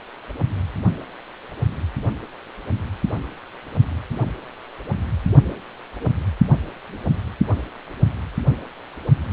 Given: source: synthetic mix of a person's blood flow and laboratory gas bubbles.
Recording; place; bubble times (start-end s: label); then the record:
Doppler ultrasound of blood flow; precordium
no bubbles
From the record:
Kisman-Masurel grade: 000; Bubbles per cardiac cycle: 0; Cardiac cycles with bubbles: 0%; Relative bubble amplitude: no bubbles discernible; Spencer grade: 0 (complete lack of bubble signals)